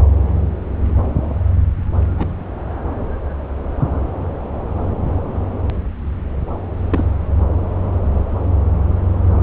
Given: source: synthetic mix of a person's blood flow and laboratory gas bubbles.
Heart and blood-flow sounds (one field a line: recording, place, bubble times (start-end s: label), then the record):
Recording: Doppler ultrasound of blood flow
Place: subclavian vein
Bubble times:
2.18-2.35 s: bubbles
6.90-7.04 s: bubbles
From the record:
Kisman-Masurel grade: 112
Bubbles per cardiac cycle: 1 to 2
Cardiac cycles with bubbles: 1 to 10%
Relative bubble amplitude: moderate (0.250 to 0.450)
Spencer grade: 1 (occasional bubble signal discernible with the cardiac motion signal, with majority of cardiac periods free of bubbles)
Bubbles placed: anywhere in the cardiac cycle